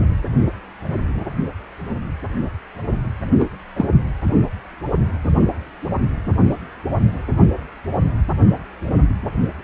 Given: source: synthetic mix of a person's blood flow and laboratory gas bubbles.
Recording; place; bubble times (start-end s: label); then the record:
Doppler ultrasound of blood flow; precordium
3.38-3.50 s: bubbles
3.76-3.88 s: bubbles
From the record:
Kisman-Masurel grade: 113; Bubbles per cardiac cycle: 1 to 2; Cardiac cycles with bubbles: 1 to 10%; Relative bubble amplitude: loud (0.450 to 0.775); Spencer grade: 1 (occasional bubble signal discernible with the cardiac motion signal, with majority of cardiac periods free of bubbles); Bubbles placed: only in the low amplitude regions of the cardiac cycle